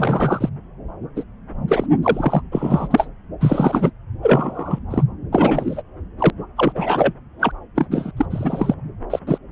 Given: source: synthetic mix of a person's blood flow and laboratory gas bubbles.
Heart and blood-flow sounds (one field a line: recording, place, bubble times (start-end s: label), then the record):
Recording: Doppler ultrasound of blood flow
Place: subclavian vein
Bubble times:
0.00-0.49 s: bubbles
1.16-1.23 s: bubbles
1.68-1.86 s: bubbles
2.03-2.42 s: bubbles
2.52-3.07 s: bubbles
3.40-3.91 s: bubbles
4.23-4.79 s: bubbles
4.90-5.04 s: bubbles
5.32-5.82 s: bubbles
6.19-6.30 s: bubbles
6.57-7.13 s: bubbles
7.40-7.52 s: bubbles
7.75-7.86 s: bubbles
7.91-8.11 s: bubbles
8.16-8.26 s: bubbles
8.30-8.75 s: bubbles
9.10-9.19 s: bubbles
9.26-9.38 s: bubbles
From the record:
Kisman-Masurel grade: 243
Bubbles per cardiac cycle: several, 3 to 8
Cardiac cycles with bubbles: 100%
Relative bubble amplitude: loud (0.450 to 0.775)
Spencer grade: 3 (all of the cardiac periods contain showers or single bubble signals, but not dominating or overriding the cardiac motion signals)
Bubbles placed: anywhere in the cardiac cycle